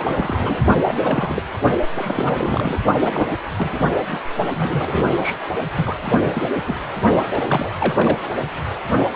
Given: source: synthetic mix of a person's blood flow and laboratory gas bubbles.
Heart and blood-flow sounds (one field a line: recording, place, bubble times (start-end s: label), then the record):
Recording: Doppler ultrasound of blood flow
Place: precordium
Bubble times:
0.00-0.61 s: bubbles
0.84-1.42 s: bubbles
1.94-2.80 s: bubbles
3.00-3.37 s: bubbles
3.56-4.00 s: bubbles
4.08-4.19 s: bubbles
4.55-5.37 s: bubbles
5.76-5.95 s: bubbles
6.04-6.48 s: bubbles
6.67-6.73 s: bubbles
7.30-7.71 s: bubbles
7.79-8.19 s: bubbles
8.24-8.29 s: bubbles
9.11-9.16 s: bubbles
From the record:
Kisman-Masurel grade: 342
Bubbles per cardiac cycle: rolling drumbeat, 9 or more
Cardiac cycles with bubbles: 100%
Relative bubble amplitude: moderate (0.250 to 0.450)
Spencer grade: 3 (all of the cardiac periods contain showers or single bubble signals, but not dominating or overriding the cardiac motion signals)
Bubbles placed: only in the low amplitude regions of the cardiac cycle